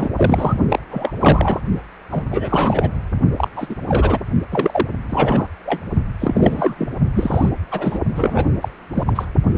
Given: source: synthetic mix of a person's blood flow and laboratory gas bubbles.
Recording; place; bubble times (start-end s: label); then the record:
Doppler ultrasound of blood flow; precordium
0.00-0.10 s: bubbles
0.16-0.59 s: bubbles
0.69-0.79 s: bubbles
0.91-1.13 s: bubbles
1.20-1.60 s: bubbles
2.12-2.24 s: bubbles
2.31-2.91 s: bubbles
3.38-3.48 s: bubbles
3.56-3.76 s: bubbles
3.88-4.19 s: bubbles
4.51-4.86 s: bubbles
5.09-5.47 s: bubbles
5.65-5.81 s: bubbles
6.20-6.75 s: bubbles
6.77-6.88 s: bubbles
7.15-7.49 s: bubbles
7.71-7.98 s: bubbles
8.15-8.45 s: bubbles
8.61-8.69 s: bubbles
8.94-9.03 s: bubbles
9.06-9.25 s: bubbles
9.51-9.58 s: bubbles
From the record:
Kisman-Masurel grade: 343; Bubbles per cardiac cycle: rolling drumbeat, 9 or more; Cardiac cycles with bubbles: 100%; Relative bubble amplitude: loud (0.450 to 0.775); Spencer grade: 3 (all of the cardiac periods contain showers or single bubble signals, but not dominating or overriding the cardiac motion signals); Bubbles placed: only in the low amplitude regions of the cardiac cycle